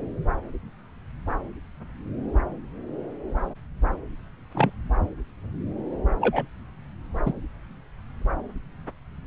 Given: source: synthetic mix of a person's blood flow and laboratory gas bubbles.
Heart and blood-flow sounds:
Doppler ultrasound of blood flow; subclavian vein
4.54-4.70 s: bubbles
6.20-6.46 s: bubbles
7.26-7.32 s: bubbles
From the record:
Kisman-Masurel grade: 122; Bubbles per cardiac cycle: 1 to 2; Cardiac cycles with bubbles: 10 to 50%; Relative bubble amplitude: moderate (0.250 to 0.450); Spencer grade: 2 (many but less than half of the cardiac periods contain bubble signals, singularly or in groups); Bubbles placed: anywhere in the cardiac cycle

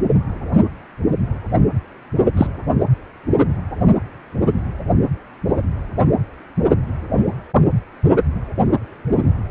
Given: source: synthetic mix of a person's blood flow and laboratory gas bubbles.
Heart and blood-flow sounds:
Doppler ultrasound of blood flow; precordium
2.37-2.46 s: bubbles
From the record:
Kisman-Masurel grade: 123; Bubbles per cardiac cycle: 1 to 2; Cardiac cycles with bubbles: 10 to 50%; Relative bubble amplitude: loud (0.450 to 0.775); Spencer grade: 2 (many but less than half of the cardiac periods contain bubble signals, singularly or in groups); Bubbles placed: anywhere in the cardiac cycle

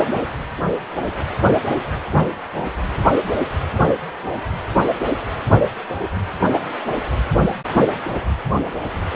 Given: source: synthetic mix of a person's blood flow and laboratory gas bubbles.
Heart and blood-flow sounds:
Doppler ultrasound of blood flow; precordium
0.00-0.23 s: bubbles
From the record:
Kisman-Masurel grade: 112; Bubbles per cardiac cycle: 1 to 2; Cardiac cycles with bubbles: 1 to 10%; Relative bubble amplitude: moderate (0.250 to 0.450); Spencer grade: 1 (occasional bubble signal discernible with the cardiac motion signal, with majority of cardiac periods free of bubbles); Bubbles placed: anywhere in the cardiac cycle

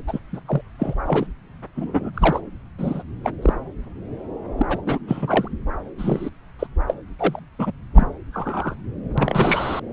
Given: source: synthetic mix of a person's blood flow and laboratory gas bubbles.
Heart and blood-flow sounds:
Doppler ultrasound of blood flow; subclavian vein
0.07-0.20 s: bubbles
0.32-0.40 s: bubbles
0.47-0.61 s: bubbles
0.79-0.94 s: bubbles
1.05-1.26 s: bubbles
1.76-2.10 s: bubbles
2.14-2.40 s: bubbles
2.78-3.02 s: bubbles
3.23-3.30 s: bubbles
3.42-3.54 s: bubbles
4.57-4.66 s: bubbles
4.69-4.82 s: bubbles
4.86-4.99 s: bubbles
5.08-5.48 s: bubbles
5.98-6.30 s: bubbles
6.59-6.67 s: bubbles
6.88-6.94 s: bubbles
7.19-7.39 s: bubbles
7.59-7.71 s: bubbles
7.94-8.07 s: bubbles
8.33-8.75 s: bubbles
9.18-9.80 s: bubbles
From the record:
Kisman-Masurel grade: 232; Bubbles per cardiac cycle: several, 3 to 8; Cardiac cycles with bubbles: 50 to 99%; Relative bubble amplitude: moderate (0.250 to 0.450); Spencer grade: 3 (all of the cardiac periods contain showers or single bubble signals, but not dominating or overriding the cardiac motion signals); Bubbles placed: anywhere in the cardiac cycle

